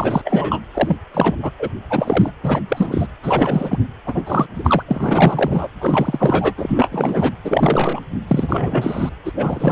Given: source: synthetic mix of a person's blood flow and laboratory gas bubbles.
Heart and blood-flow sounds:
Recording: Doppler ultrasound of blood flow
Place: precordium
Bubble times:
0.00-0.21 s: bubbles
0.25-0.60 s: bubbles
0.73-0.97 s: bubbles
1.13-1.36 s: bubbles
1.42-1.51 s: bubbles
1.59-1.69 s: bubbles
1.90-2.31 s: bubbles
2.43-2.60 s: bubbles
2.68-3.08 s: bubbles
3.23-3.79 s: bubbles
4.06-4.23 s: bubbles
4.26-4.46 s: bubbles
4.55-4.83 s: bubbles
4.88-5.67 s: bubbles
5.80-6.54 s: bubbles
6.57-6.88 s: bubbles
6.91-7.33 s: bubbles
7.45-8.00 s: bubbles
8.27-9.09 s: bubbles
9.25-9.32 s: bubbles
9.34-9.72 s: bubbles
From the record:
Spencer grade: 3 (all of the cardiac periods contain showers or single bubble signals, but not dominating or overriding the cardiac motion signals)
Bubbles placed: anywhere in the cardiac cycle

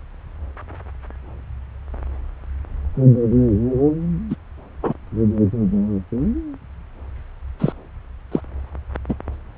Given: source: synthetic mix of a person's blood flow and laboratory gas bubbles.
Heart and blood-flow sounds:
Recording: Doppler ultrasound of blood flow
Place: subclavian vein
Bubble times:
4.29-4.35 s: bubbles
4.83-4.93 s: bubbles
7.59-7.72 s: bubbles
8.31-8.40 s: bubbles
9.08-9.15 s: bubbles
From the record:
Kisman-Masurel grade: 123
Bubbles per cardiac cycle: 1 to 2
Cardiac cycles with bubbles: 10 to 50%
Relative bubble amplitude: loud (0.450 to 0.775)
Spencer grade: 2 (many but less than half of the cardiac periods contain bubble signals, singularly or in groups)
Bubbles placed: anywhere in the cardiac cycle

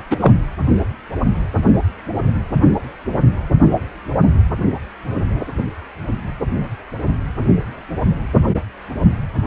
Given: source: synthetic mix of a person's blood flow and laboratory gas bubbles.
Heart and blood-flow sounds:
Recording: Doppler ultrasound of blood flow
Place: precordium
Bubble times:
0.10-0.17 s: bubbles
0.20-0.33 s: bubbles
From the record:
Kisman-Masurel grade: 113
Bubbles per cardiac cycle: 1 to 2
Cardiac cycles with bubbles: 1 to 10%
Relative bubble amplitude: loud (0.450 to 0.775)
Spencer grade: 1 (occasional bubble signal discernible with the cardiac motion signal, with majority of cardiac periods free of bubbles)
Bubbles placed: anywhere in the cardiac cycle

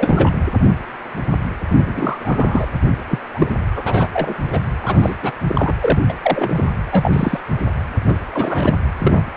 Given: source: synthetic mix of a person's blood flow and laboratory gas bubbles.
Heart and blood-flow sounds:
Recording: Doppler ultrasound of blood flow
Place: precordium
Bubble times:
0.00-0.38 s: bubbles
1.69-2.68 s: bubbles
3.08-3.19 s: bubbles
3.33-3.53 s: bubbles
3.75-4.08 s: bubbles
4.12-4.34 s: bubbles
4.52-4.59 s: bubbles
4.81-5.17 s: bubbles
5.22-5.32 s: bubbles
5.48-5.74 s: bubbles
5.80-6.00 s: bubbles
6.08-6.14 s: bubbles
6.22-6.70 s: bubbles
6.86-7.40 s: bubbles
8.06-8.20 s: bubbles
8.31-8.74 s: bubbles
8.98-9.23 s: bubbles
From the record:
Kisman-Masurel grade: 233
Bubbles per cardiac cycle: several, 3 to 8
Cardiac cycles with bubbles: 50 to 99%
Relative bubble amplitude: loud (0.450 to 0.775)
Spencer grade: 3 (all of the cardiac periods contain showers or single bubble signals, but not dominating or overriding the cardiac motion signals)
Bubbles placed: anywhere in the cardiac cycle

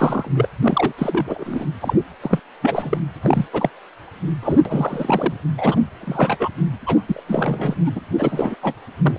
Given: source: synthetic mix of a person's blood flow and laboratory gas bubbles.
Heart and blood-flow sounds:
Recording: Doppler ultrasound of blood flow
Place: precordium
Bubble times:
0.00-0.31 s: bubbles
0.34-0.49 s: bubbles
0.62-0.93 s: bubbles
0.98-1.66 s: bubbles
1.80-1.94 s: bubbles
2.21-2.39 s: bubbles
2.62-2.97 s: bubbles
3.22-3.46 s: bubbles
3.53-3.70 s: bubbles
4.42-4.58 s: bubbles
4.65-5.34 s: bubbles
5.57-5.81 s: bubbles
6.00-6.50 s: bubbles
6.86-7.02 s: bubbles
7.07-7.21 s: bubbles
7.27-7.75 s: bubbles
7.86-8.00 s: bubbles
8.18-8.56 s: bubbles
8.62-8.73 s: bubbles
9.02-9.19 s: bubbles
From the record:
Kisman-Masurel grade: 342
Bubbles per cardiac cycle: rolling drumbeat, 9 or more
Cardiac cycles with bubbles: 100%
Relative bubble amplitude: moderate (0.250 to 0.450)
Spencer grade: 3 (all of the cardiac periods contain showers or single bubble signals, but not dominating or overriding the cardiac motion signals)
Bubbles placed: anywhere in the cardiac cycle

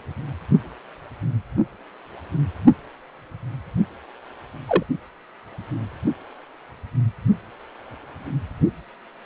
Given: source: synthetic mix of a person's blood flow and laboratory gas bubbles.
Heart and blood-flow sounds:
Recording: Doppler ultrasound of blood flow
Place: precordium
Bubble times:
4.67-4.83 s: bubbles
From the record:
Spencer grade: 1 (occasional bubble signal discernible with the cardiac motion signal, with majority of cardiac periods free of bubbles)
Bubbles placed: only in the low amplitude regions of the cardiac cycle

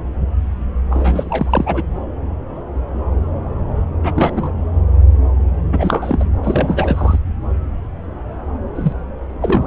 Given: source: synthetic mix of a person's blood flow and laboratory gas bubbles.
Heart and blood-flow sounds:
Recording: Doppler ultrasound of blood flow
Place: subclavian vein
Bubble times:
0.91-1.83 s: bubbles
4.03-4.12 s: bubbles
4.15-4.53 s: bubbles
5.72-6.25 s: bubbles
6.43-7.19 s: bubbles
8.75-8.92 s: bubbles
9.41-9.67 s: bubbles
From the record:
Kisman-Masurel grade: 223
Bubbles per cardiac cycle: several, 3 to 8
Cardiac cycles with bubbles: 10 to 50%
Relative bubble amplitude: loud (0.450 to 0.775)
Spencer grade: 2 (many but less than half of the cardiac periods contain bubble signals, singularly or in groups)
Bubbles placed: anywhere in the cardiac cycle

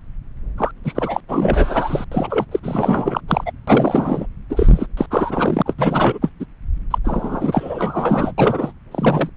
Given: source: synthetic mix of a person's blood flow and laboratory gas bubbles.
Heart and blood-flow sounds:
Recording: Doppler ultrasound of blood flow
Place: subclavian vein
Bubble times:
0.57-0.72 s: bubbles
0.84-1.21 s: bubbles
1.29-2.04 s: bubbles
2.12-2.45 s: bubbles
2.51-2.60 s: bubbles
2.62-3.21 s: bubbles
3.28-3.52 s: bubbles
3.67-4.26 s: bubbles
4.50-4.87 s: bubbles
4.97-5.06 s: bubbles
5.10-5.62 s: bubbles
5.65-5.74 s: bubbles
5.78-6.19 s: bubbles
6.21-6.30 s: bubbles
6.40-6.46 s: bubbles
6.90-6.99 s: bubbles
7.04-8.33 s: bubbles
8.38-8.72 s: bubbles
8.91-9.29 s: bubbles
From the record:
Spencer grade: 4 (maximum detectable bubble signal sounding continuously throughout systole and diastole of every cardiac period, and overriding the amplitude of the normal cardiac signals)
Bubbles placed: anywhere in the cardiac cycle

